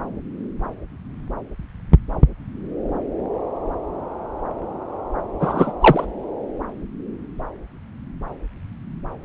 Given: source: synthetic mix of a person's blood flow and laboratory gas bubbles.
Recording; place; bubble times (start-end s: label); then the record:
Doppler ultrasound of blood flow; subclavian vein
5.40-5.74 s: bubbles
5.80-6.06 s: bubbles
From the record:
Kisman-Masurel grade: 213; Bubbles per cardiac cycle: several, 3 to 8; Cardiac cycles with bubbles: 1 to 10%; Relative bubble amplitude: loud (0.450 to 0.775); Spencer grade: 1 (occasional bubble signal discernible with the cardiac motion signal, with majority of cardiac periods free of bubbles); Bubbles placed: anywhere in the cardiac cycle